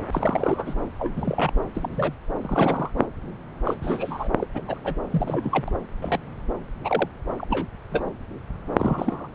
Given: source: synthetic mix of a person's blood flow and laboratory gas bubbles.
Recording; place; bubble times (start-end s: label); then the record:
Doppler ultrasound of blood flow; subclavian vein
0.11-0.74 s: bubbles
0.99-1.52 s: bubbles
1.75-2.15 s: bubbles
2.42-2.90 s: bubbles
2.97-3.06 s: bubbles
3.65-3.75 s: bubbles
3.82-4.29 s: bubbles
4.38-4.46 s: bubbles
4.54-4.62 s: bubbles
4.67-4.79 s: bubbles
4.84-4.95 s: bubbles
5.11-5.64 s: bubbles
5.67-5.71 s: bubbles
6.01-6.18 s: bubbles
6.84-7.08 s: bubbles
7.38-7.45 s: bubbles
7.50-7.67 s: bubbles
7.92-8.04 s: bubbles
8.78-9.29 s: bubbles
From the record:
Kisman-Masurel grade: 242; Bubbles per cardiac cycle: several, 3 to 8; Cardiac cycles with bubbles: 100%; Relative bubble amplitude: moderate (0.250 to 0.450); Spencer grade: 3 (all of the cardiac periods contain showers or single bubble signals, but not dominating or overriding the cardiac motion signals); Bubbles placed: anywhere in the cardiac cycle